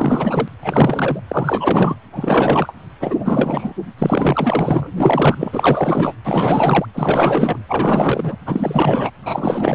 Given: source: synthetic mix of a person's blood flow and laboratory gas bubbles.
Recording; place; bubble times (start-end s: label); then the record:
Doppler ultrasound of blood flow; precordium
0.00-0.48 s: bubbles
0.59-1.20 s: bubbles
1.28-1.97 s: bubbles
2.12-2.73 s: bubbles
3.00-3.73 s: bubbles
3.98-4.93 s: bubbles
4.97-6.14 s: bubbles
6.24-6.85 s: bubbles
6.94-7.59 s: bubbles
7.67-8.36 s: bubbles
8.45-9.11 s: bubbles
9.22-9.75 s: bubbles
From the record:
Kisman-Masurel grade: 444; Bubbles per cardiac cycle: continuous sound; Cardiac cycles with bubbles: 100%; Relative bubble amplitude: maximal (0.775 to 0.999); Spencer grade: 4 (maximum detectable bubble signal sounding continuously throughout systole and diastole of every cardiac period, and overriding the amplitude of the normal cardiac signals); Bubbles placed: anywhere in the cardiac cycle